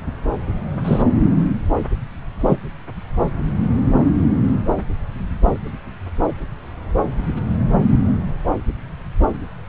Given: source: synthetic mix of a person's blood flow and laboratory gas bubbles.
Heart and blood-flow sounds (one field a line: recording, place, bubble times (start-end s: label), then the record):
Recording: Doppler ultrasound of blood flow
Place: subclavian vein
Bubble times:
0.84-1.02 s: bubbles
2.41-2.57 s: bubbles
From the record:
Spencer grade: 2 (many but less than half of the cardiac periods contain bubble signals, singularly or in groups)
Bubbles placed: anywhere in the cardiac cycle